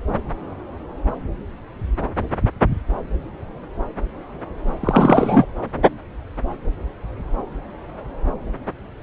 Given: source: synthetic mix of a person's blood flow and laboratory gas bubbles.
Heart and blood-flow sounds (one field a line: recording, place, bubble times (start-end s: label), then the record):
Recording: Doppler ultrasound of blood flow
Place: subclavian vein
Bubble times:
4.80-5.46 s: bubbles
From the record:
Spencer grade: 1 (occasional bubble signal discernible with the cardiac motion signal, with majority of cardiac periods free of bubbles)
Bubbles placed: anywhere in the cardiac cycle